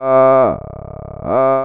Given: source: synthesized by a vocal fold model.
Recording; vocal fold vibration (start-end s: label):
sustained vowel that changes in the middle
0.00-0.40 s: 132.8 Hz, open quotient 0.25
0.60-1.20 s: 34.3 Hz, open quotient 0.23
1.40-1.65 s: 132.8 Hz, open quotient 0.25